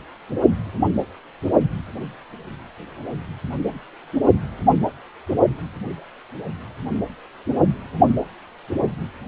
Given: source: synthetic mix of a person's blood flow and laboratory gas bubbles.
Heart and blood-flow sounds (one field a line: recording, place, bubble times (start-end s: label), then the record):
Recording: Doppler ultrasound of blood flow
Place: precordium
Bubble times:
no bubbles
From the record:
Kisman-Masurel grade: 000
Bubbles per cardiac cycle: 0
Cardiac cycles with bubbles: 0%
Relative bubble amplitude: no bubbles discernible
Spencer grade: 0 (complete lack of bubble signals)